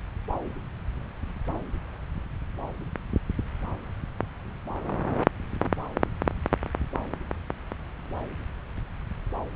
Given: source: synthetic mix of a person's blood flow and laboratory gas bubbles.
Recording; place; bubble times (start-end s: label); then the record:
Doppler ultrasound of blood flow; subclavian vein
no bubbles
From the record:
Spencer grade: 0 (complete lack of bubble signals)